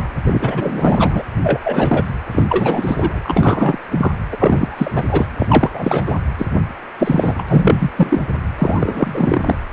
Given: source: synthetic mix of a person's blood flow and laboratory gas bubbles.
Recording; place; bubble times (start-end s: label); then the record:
Doppler ultrasound of blood flow; precordium
0.00-0.09 s: bubbles
0.26-1.22 s: bubbles
1.43-1.58 s: bubbles
1.65-2.17 s: bubbles
2.31-2.43 s: bubbles
2.48-3.19 s: bubbles
3.23-3.78 s: bubbles
3.90-4.11 s: bubbles
4.31-4.91 s: bubbles
4.95-5.03 s: bubbles
5.11-5.26 s: bubbles
5.38-5.69 s: bubbles
5.73-6.17 s: bubbles
6.38-6.46 s: bubbles
6.99-7.45 s: bubbles
7.48-7.90 s: bubbles
7.97-8.21 s: bubbles
8.58-9.55 s: bubbles
From the record:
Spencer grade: 3 (all of the cardiac periods contain showers or single bubble signals, but not dominating or overriding the cardiac motion signals); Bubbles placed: anywhere in the cardiac cycle